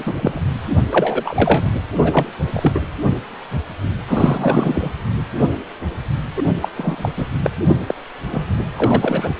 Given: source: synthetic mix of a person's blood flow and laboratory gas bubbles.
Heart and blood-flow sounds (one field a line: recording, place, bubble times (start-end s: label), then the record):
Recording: Doppler ultrasound of blood flow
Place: precordium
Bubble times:
0.00-0.42 s: bubbles
0.68-1.70 s: bubbles
1.97-2.28 s: bubbles
2.52-2.80 s: bubbles
4.08-4.91 s: bubbles
6.35-6.49 s: bubbles
6.61-6.70 s: bubbles
6.77-7.12 s: bubbles
7.17-7.29 s: bubbles
7.44-7.50 s: bubbles
7.67-7.77 s: bubbles
7.87-7.95 s: bubbles
8.31-8.44 s: bubbles
8.77-9.35 s: bubbles
From the record:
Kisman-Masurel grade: 233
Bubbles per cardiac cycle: several, 3 to 8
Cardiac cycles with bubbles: 50 to 99%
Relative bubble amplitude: loud (0.450 to 0.775)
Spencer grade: 3 (all of the cardiac periods contain showers or single bubble signals, but not dominating or overriding the cardiac motion signals)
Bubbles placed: anywhere in the cardiac cycle